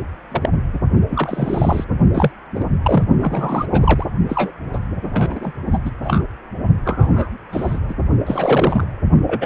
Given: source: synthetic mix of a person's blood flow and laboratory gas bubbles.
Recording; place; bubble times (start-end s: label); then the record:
Doppler ultrasound of blood flow; precordium
0.31-0.49 s: bubbles
0.73-0.79 s: bubbles
1.10-1.85 s: bubbles
2.13-2.31 s: bubbles
2.54-2.66 s: bubbles
2.83-3.04 s: bubbles
3.19-3.66 s: bubbles
3.71-4.06 s: bubbles
4.29-4.51 s: bubbles
4.73-4.79 s: bubbles
5.03-5.51 s: bubbles
5.72-5.78 s: bubbles
5.84-5.91 s: bubbles
6.04-6.24 s: bubbles
6.85-7.30 s: bubbles
7.52-7.79 s: bubbles
7.88-7.94 s: bubbles
8.26-8.84 s: bubbles
9.27-9.46 s: bubbles
From the record:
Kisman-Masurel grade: 242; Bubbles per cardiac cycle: several, 3 to 8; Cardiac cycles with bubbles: 100%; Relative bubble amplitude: moderate (0.250 to 0.450); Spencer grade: 3 (all of the cardiac periods contain showers or single bubble signals, but not dominating or overriding the cardiac motion signals); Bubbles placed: only in the low amplitude regions of the cardiac cycle